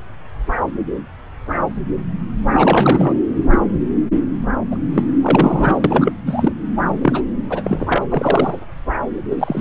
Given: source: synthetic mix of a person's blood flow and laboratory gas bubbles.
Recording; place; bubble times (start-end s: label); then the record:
Doppler ultrasound of blood flow; subclavian vein
2.54-3.15 s: bubbles
3.50-3.58 s: bubbles
4.71-4.77 s: bubbles
4.94-5.04 s: bubbles
5.21-6.12 s: bubbles
6.26-6.52 s: bubbles
7.02-7.27 s: bubbles
7.50-8.02 s: bubbles
8.10-8.59 s: bubbles
9.30-9.61 s: bubbles
From the record:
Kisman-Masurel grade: 333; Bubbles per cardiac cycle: rolling drumbeat, 9 or more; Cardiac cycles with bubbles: 50 to 99%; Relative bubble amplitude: loud (0.450 to 0.775); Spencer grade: 3 (all of the cardiac periods contain showers or single bubble signals, but not dominating or overriding the cardiac motion signals); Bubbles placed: anywhere in the cardiac cycle